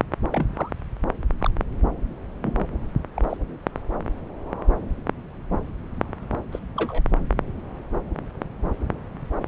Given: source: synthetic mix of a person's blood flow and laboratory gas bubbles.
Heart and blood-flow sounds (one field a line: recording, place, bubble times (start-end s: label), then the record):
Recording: Doppler ultrasound of blood flow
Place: subclavian vein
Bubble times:
0.31-0.72 s: bubbles
1.41-1.50 s: bubbles
2.42-2.66 s: bubbles
3.17-3.22 s: bubbles
3.29-3.37 s: bubbles
6.51-6.59 s: bubbles
6.76-7.02 s: bubbles
From the record:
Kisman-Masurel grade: 121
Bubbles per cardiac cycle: 1 to 2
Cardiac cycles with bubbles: 10 to 50%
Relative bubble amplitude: barely perceptible (0.100 to 0.250)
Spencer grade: 2 (many but less than half of the cardiac periods contain bubble signals, singularly or in groups)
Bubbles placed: anywhere in the cardiac cycle